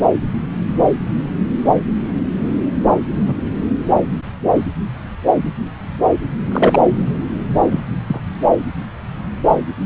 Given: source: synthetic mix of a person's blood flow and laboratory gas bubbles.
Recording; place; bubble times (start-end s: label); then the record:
Doppler ultrasound of blood flow; subclavian vein
3.27-3.35 s: bubbles
6.51-6.79 s: bubbles
7.71-7.80 s: bubbles
8.07-8.20 s: bubbles
From the record:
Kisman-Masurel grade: 123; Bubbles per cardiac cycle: 1 to 2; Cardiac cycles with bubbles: 10 to 50%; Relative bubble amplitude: loud (0.450 to 0.775); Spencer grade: 2 (many but less than half of the cardiac periods contain bubble signals, singularly or in groups); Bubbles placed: anywhere in the cardiac cycle